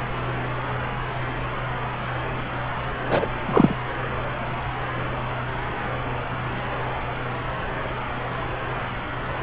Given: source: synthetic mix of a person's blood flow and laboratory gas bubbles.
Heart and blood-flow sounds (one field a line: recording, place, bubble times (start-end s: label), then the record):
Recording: Doppler ultrasound of blood flow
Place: subclavian vein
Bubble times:
3.07-3.27 s: bubbles
3.46-3.75 s: bubbles
From the record:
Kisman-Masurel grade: 113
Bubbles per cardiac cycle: 1 to 2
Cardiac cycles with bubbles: 1 to 10%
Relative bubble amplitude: loud (0.450 to 0.775)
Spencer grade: 1 (occasional bubble signal discernible with the cardiac motion signal, with majority of cardiac periods free of bubbles)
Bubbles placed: anywhere in the cardiac cycle